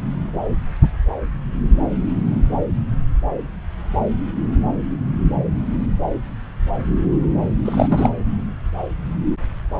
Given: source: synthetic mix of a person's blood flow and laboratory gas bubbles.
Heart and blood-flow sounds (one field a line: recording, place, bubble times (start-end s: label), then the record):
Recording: Doppler ultrasound of blood flow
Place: subclavian vein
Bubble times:
7.64-8.10 s: bubbles
From the record:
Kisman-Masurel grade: 222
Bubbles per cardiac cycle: several, 3 to 8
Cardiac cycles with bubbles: 10 to 50%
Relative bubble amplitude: moderate (0.250 to 0.450)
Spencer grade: 2 (many but less than half of the cardiac periods contain bubble signals, singularly or in groups)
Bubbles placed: anywhere in the cardiac cycle